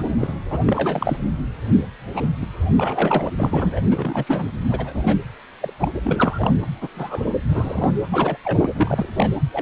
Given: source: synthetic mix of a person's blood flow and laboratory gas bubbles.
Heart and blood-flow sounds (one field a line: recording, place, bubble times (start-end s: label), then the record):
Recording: Doppler ultrasound of blood flow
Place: precordium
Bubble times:
0.00-0.06 s: bubbles
0.19-0.34 s: bubbles
0.50-0.58 s: bubbles
0.65-1.17 s: bubbles
2.13-2.27 s: bubbles
2.42-2.46 s: bubbles
2.73-3.30 s: bubbles
3.37-3.82 s: bubbles
3.90-4.24 s: bubbles
4.27-4.45 s: bubbles
4.68-5.16 s: bubbles
5.62-5.73 s: bubbles
5.79-5.91 s: bubbles
6.04-6.54 s: bubbles
6.81-6.88 s: bubbles
6.95-7.38 s: bubbles
7.49-7.92 s: bubbles
8.12-8.37 s: bubbles
8.44-8.70 s: bubbles
8.75-9.08 s: bubbles
9.16-9.31 s: bubbles
9.52-9.62 s: bubbles
From the record:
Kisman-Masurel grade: 242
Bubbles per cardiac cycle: several, 3 to 8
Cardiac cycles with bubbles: 100%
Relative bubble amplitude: moderate (0.250 to 0.450)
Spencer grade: 3 (all of the cardiac periods contain showers or single bubble signals, but not dominating or overriding the cardiac motion signals)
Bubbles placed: anywhere in the cardiac cycle